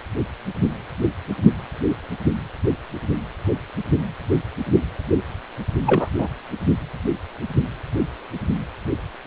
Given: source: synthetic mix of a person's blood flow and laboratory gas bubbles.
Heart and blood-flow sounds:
Doppler ultrasound of blood flow; precordium
5.86-6.10 s: bubbles
6.18-6.28 s: bubbles
From the record:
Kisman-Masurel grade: 223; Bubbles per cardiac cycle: several, 3 to 8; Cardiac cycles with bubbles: 10 to 50%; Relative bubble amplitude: loud (0.450 to 0.775); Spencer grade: 2 (many but less than half of the cardiac periods contain bubble signals, singularly or in groups); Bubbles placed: only in the low amplitude regions of the cardiac cycle

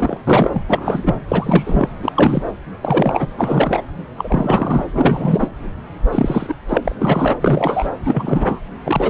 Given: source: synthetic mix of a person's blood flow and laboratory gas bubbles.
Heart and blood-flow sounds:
Doppler ultrasound of blood flow; subclavian vein
0.00-0.17 s: bubbles
0.27-0.64 s: bubbles
0.69-1.21 s: bubbles
1.28-1.89 s: bubbles
2.02-2.12 s: bubbles
2.14-2.42 s: bubbles
2.82-3.28 s: bubbles
3.37-3.81 s: bubbles
4.17-4.86 s: bubbles
4.93-5.55 s: bubbles
6.12-6.54 s: bubbles
6.68-6.96 s: bubbles
7.00-7.34 s: bubbles
7.40-7.91 s: bubbles
8.04-8.61 s: bubbles
8.85-9.10 s: bubbles
From the record:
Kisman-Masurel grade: 343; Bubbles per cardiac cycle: rolling drumbeat, 9 or more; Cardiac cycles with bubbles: 100%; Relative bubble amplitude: loud (0.450 to 0.775); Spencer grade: 3 (all of the cardiac periods contain showers or single bubble signals, but not dominating or overriding the cardiac motion signals); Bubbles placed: anywhere in the cardiac cycle

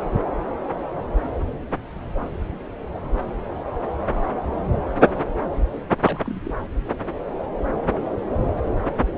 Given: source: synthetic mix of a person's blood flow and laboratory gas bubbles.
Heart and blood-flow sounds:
Doppler ultrasound of blood flow; subclavian vein
6.04-6.53 s: bubbles
From the record:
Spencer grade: 1 (occasional bubble signal discernible with the cardiac motion signal, with majority of cardiac periods free of bubbles); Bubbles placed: anywhere in the cardiac cycle

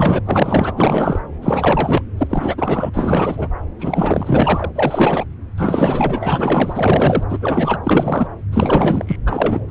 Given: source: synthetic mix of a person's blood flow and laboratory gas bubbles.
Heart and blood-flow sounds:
Doppler ultrasound of blood flow; subclavian vein
0.00-0.19 s: bubbles
0.25-0.72 s: bubbles
0.76-1.20 s: bubbles
1.42-2.02 s: bubbles
2.17-2.90 s: bubbles
2.93-3.48 s: bubbles
3.79-4.70 s: bubbles
4.74-5.24 s: bubbles
5.57-7.23 s: bubbles
7.29-7.78 s: bubbles
7.83-8.27 s: bubbles
8.51-9.16 s: bubbles
9.26-9.61 s: bubbles
9.68-9.71 s: bubbles
From the record:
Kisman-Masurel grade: 444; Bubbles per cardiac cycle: continuous sound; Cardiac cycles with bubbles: 100%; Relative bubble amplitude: maximal (0.775 to 0.999); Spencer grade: 4 (maximum detectable bubble signal sounding continuously throughout systole and diastole of every cardiac period, and overriding the amplitude of the normal cardiac signals); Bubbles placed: anywhere in the cardiac cycle

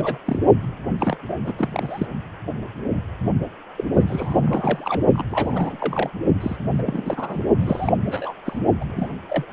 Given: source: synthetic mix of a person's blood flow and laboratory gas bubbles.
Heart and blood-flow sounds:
Doppler ultrasound of blood flow; precordium
0.00-0.18 s: bubbles
0.25-0.39 s: bubbles
0.98-1.17 s: bubbles
1.28-1.38 s: bubbles
1.44-1.53 s: bubbles
1.58-2.07 s: bubbles
3.77-3.84 s: bubbles
3.92-5.01 s: bubbles
5.12-5.25 s: bubbles
5.29-5.76 s: bubbles
5.79-6.09 s: bubbles
6.40-6.57 s: bubbles
6.73-7.44 s: bubbles
7.59-7.92 s: bubbles
8.06-8.34 s: bubbles
8.45-8.59 s: bubbles
8.81-8.85 s: bubbles
8.88-9.10 s: bubbles
9.28-9.45 s: bubbles
From the record:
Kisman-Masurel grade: 332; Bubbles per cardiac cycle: rolling drumbeat, 9 or more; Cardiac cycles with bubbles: 50 to 99%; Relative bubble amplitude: moderate (0.250 to 0.450); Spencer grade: 3 (all of the cardiac periods contain showers or single bubble signals, but not dominating or overriding the cardiac motion signals); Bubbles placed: only in the low amplitude regions of the cardiac cycle

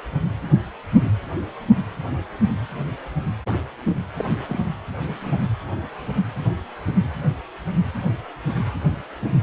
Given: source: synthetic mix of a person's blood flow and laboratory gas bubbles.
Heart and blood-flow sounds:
Doppler ultrasound of blood flow; precordium
4.17-4.25 s: bubbles
4.49-4.59 s: bubbles
5.21-5.39 s: bubbles
From the record:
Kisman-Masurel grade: 121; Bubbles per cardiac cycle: 1 to 2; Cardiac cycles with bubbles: 10 to 50%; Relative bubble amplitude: barely perceptible (0.100 to 0.250); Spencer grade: 2 (many but less than half of the cardiac periods contain bubble signals, singularly or in groups); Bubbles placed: anywhere in the cardiac cycle

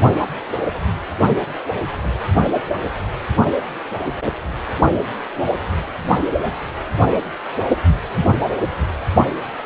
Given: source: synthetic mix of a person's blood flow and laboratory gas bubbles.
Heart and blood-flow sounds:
Doppler ultrasound of blood flow; precordium
no bubbles
From the record:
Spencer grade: 0 (complete lack of bubble signals)

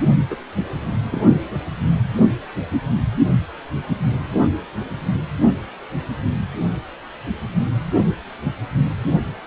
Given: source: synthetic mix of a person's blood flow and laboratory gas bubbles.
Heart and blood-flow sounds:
Doppler ultrasound of blood flow; precordium
0.30-0.36 s: bubbles
1.10-1.23 s: bubbles
From the record:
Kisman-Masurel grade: 121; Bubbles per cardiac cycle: 1 to 2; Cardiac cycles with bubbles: 10 to 50%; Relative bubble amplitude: barely perceptible (0.100 to 0.250); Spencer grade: 2 (many but less than half of the cardiac periods contain bubble signals, singularly or in groups); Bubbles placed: only in the low amplitude regions of the cardiac cycle

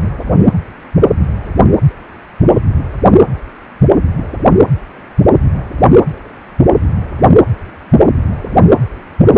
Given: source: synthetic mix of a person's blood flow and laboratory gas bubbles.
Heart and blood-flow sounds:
Doppler ultrasound of blood flow; precordium
no bubbles
From the record:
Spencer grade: 0 (complete lack of bubble signals)

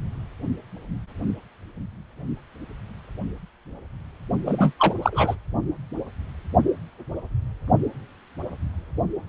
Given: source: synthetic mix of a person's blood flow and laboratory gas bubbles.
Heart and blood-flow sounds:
Doppler ultrasound of blood flow; precordium
4.46-4.72 s: bubbles
4.79-4.94 s: bubbles
5.02-5.37 s: bubbles
From the record:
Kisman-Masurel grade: 213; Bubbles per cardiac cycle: several, 3 to 8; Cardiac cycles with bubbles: 1 to 10%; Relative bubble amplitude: loud (0.450 to 0.775); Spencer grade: 1 (occasional bubble signal discernible with the cardiac motion signal, with majority of cardiac periods free of bubbles); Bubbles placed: only in the low amplitude regions of the cardiac cycle

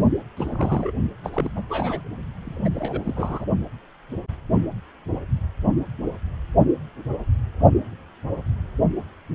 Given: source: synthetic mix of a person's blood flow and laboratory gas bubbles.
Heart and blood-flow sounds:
Doppler ultrasound of blood flow; precordium
0.36-0.92 s: bubbles
1.24-1.49 s: bubbles
1.56-1.62 s: bubbles
1.69-2.02 s: bubbles
2.45-3.00 s: bubbles
3.04-3.45 s: bubbles
From the record:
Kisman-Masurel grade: 221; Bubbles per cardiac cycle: several, 3 to 8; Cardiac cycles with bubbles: 10 to 50%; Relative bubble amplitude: barely perceptible (0.100 to 0.250); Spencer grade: 2 (many but less than half of the cardiac periods contain bubble signals, singularly or in groups); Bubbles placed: only in the low amplitude regions of the cardiac cycle

